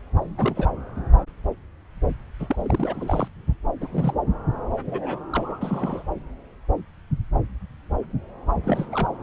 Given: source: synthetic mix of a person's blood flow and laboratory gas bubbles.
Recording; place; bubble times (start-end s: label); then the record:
Doppler ultrasound of blood flow; subclavian vein
0.38-0.69 s: bubbles
2.40-3.28 s: bubbles
3.81-3.88 s: bubbles
3.91-4.14 s: bubbles
4.88-5.18 s: bubbles
5.32-6.03 s: bubbles
8.63-8.87 s: bubbles
8.91-9.07 s: bubbles
From the record:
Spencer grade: 2 (many but less than half of the cardiac periods contain bubble signals, singularly or in groups); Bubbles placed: anywhere in the cardiac cycle